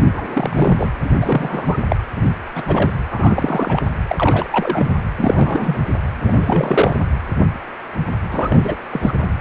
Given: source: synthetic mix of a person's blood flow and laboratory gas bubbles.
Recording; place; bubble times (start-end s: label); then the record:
Doppler ultrasound of blood flow; precordium
0.13-0.90 s: bubbles
1.04-1.77 s: bubbles
1.90-1.96 s: bubbles
2.16-2.33 s: bubbles
2.55-2.63 s: bubbles
2.67-2.91 s: bubbles
3.10-3.86 s: bubbles
4.08-4.90 s: bubbles
5.17-5.82 s: bubbles
6.21-6.98 s: bubbles
8.30-8.76 s: bubbles
8.91-9.13 s: bubbles
9.21-9.31 s: bubbles
From the record:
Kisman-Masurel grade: 332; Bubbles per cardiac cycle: rolling drumbeat, 9 or more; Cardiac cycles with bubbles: 50 to 99%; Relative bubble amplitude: moderate (0.250 to 0.450); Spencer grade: 3 (all of the cardiac periods contain showers or single bubble signals, but not dominating or overriding the cardiac motion signals); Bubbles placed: anywhere in the cardiac cycle